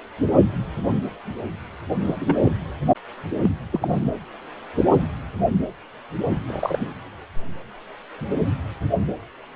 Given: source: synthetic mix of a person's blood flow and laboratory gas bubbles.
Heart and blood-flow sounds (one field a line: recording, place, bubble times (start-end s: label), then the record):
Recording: Doppler ultrasound of blood flow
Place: precordium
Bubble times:
2.04-2.16 s: bubbles
2.20-2.35 s: bubbles
2.42-2.51 s: bubbles
3.42-3.50 s: bubbles
3.73-4.11 s: bubbles
6.48-6.92 s: bubbles
From the record:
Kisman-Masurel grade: 222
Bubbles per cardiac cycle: several, 3 to 8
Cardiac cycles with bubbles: 10 to 50%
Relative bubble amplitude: moderate (0.250 to 0.450)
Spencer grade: 2 (many but less than half of the cardiac periods contain bubble signals, singularly or in groups)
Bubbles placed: anywhere in the cardiac cycle